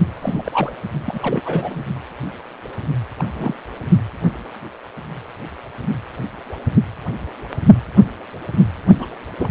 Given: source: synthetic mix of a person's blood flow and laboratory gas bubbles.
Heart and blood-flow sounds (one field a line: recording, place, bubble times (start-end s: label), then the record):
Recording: Doppler ultrasound of blood flow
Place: precordium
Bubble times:
0.22-0.74 s: bubbles
1.06-1.42 s: bubbles
1.45-1.85 s: bubbles
3.19-3.55 s: bubbles
8.99-9.08 s: bubbles
9.38-9.51 s: bubbles
From the record:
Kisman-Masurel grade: 222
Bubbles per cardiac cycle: several, 3 to 8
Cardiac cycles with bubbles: 10 to 50%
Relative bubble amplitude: moderate (0.250 to 0.450)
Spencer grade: 2 (many but less than half of the cardiac periods contain bubble signals, singularly or in groups)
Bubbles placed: only in the low amplitude regions of the cardiac cycle